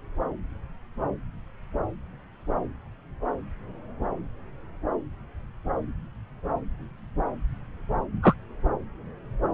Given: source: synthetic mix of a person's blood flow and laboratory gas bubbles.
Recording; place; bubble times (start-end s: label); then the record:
Doppler ultrasound of blood flow; subclavian vein
8.23-8.34 s: bubbles
From the record:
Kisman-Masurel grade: 123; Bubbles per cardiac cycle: 1 to 2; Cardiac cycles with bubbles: 10 to 50%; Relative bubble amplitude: loud (0.450 to 0.775); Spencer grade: 2 (many but less than half of the cardiac periods contain bubble signals, singularly or in groups); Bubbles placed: anywhere in the cardiac cycle